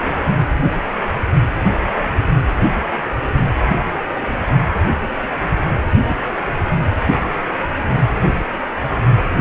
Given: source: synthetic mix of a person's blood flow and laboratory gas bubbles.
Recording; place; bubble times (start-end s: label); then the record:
Doppler ultrasound of blood flow; precordium
6.08-6.17 s: bubbles
6.46-6.54 s: bubbles
From the record:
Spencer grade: 1 (occasional bubble signal discernible with the cardiac motion signal, with majority of cardiac periods free of bubbles); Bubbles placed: anywhere in the cardiac cycle